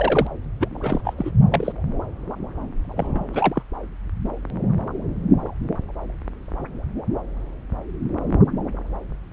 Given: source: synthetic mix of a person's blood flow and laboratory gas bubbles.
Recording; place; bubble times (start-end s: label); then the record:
Doppler ultrasound of blood flow; subclavian vein
0.00-0.27 s: bubbles
0.60-0.68 s: bubbles
0.71-1.01 s: bubbles
1.04-1.13 s: bubbles
1.18-1.31 s: bubbles
1.50-1.72 s: bubbles
2.96-3.62 s: bubbles
From the record:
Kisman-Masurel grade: 222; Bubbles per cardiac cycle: several, 3 to 8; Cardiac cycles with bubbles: 10 to 50%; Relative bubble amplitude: moderate (0.250 to 0.450); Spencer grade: 2 (many but less than half of the cardiac periods contain bubble signals, singularly or in groups); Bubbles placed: anywhere in the cardiac cycle